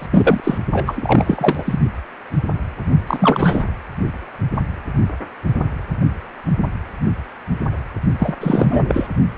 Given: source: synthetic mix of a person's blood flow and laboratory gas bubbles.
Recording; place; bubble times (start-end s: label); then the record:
Doppler ultrasound of blood flow; precordium
0.00-0.09 s: bubbles
0.12-0.40 s: bubbles
0.43-0.59 s: bubbles
0.73-1.79 s: bubbles
3.07-3.65 s: bubbles
8.19-8.35 s: bubbles
8.41-9.07 s: bubbles
From the record:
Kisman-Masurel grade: 333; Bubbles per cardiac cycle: rolling drumbeat, 9 or more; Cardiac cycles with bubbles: 50 to 99%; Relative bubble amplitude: loud (0.450 to 0.775); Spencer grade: 3 (all of the cardiac periods contain showers or single bubble signals, but not dominating or overriding the cardiac motion signals); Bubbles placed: only in the low amplitude regions of the cardiac cycle